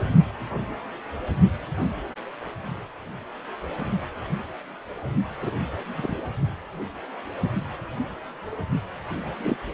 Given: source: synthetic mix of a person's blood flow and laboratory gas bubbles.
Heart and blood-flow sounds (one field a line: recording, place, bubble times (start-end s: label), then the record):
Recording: Doppler ultrasound of blood flow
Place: precordium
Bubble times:
5.42-5.50 s: bubbles
5.96-6.16 s: bubbles
9.43-9.56 s: bubbles
From the record:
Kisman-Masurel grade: 122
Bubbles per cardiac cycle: 1 to 2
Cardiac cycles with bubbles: 10 to 50%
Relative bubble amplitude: moderate (0.250 to 0.450)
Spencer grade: 2 (many but less than half of the cardiac periods contain bubble signals, singularly or in groups)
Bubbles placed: only in the low amplitude regions of the cardiac cycle